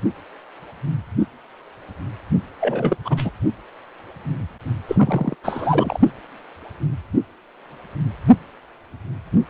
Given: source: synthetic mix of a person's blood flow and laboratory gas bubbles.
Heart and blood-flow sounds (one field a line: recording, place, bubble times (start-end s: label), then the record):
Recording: Doppler ultrasound of blood flow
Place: precordium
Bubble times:
2.60-2.96 s: bubbles
3.04-3.30 s: bubbles
4.88-5.35 s: bubbles
5.43-5.99 s: bubbles
From the record:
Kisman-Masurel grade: 222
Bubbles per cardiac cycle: several, 3 to 8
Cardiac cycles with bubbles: 10 to 50%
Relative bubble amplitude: moderate (0.250 to 0.450)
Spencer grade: 2 (many but less than half of the cardiac periods contain bubble signals, singularly or in groups)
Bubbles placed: only in the low amplitude regions of the cardiac cycle